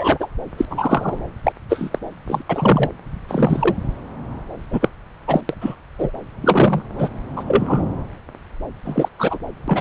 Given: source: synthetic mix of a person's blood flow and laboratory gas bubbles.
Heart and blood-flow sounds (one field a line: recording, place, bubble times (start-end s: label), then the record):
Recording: Doppler ultrasound of blood flow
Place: subclavian vein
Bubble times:
0.00-0.28 s: bubbles
0.57-0.66 s: bubbles
0.70-1.19 s: bubbles
1.43-1.52 s: bubbles
1.69-1.99 s: bubbles
2.27-2.43 s: bubbles
2.49-2.91 s: bubbles
3.28-3.75 s: bubbles
4.71-4.88 s: bubbles
5.28-5.41 s: bubbles
5.49-5.54 s: bubbles
5.61-5.75 s: bubbles
5.98-6.11 s: bubbles
6.42-6.83 s: bubbles
6.99-7.08 s: bubbles
7.36-7.44 s: bubbles
7.47-7.83 s: bubbles
8.85-9.08 s: bubbles
9.18-9.38 s: bubbles
9.67-9.81 s: bubbles
From the record:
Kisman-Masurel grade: 233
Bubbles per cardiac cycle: several, 3 to 8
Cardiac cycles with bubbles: 50 to 99%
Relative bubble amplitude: loud (0.450 to 0.775)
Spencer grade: 3 (all of the cardiac periods contain showers or single bubble signals, but not dominating or overriding the cardiac motion signals)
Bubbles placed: anywhere in the cardiac cycle